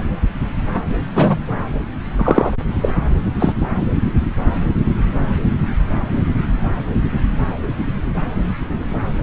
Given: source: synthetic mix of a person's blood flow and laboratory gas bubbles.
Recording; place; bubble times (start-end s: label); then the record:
Doppler ultrasound of blood flow; subclavian vein
1.14-1.39 s: bubbles
2.18-2.57 s: bubbles
2.81-2.90 s: bubbles
3.40-3.55 s: bubbles
From the record:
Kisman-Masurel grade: 123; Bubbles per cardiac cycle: 1 to 2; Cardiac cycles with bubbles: 10 to 50%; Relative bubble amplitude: loud (0.450 to 0.775); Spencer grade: 2 (many but less than half of the cardiac periods contain bubble signals, singularly or in groups); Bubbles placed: anywhere in the cardiac cycle